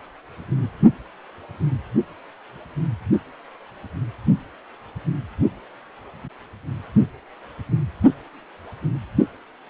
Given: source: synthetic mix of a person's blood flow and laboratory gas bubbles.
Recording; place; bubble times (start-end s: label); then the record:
Doppler ultrasound of blood flow; precordium
no bubbles
From the record:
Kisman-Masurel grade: 000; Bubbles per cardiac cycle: 0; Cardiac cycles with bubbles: 0%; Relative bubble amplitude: no bubbles discernible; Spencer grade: 0 (complete lack of bubble signals)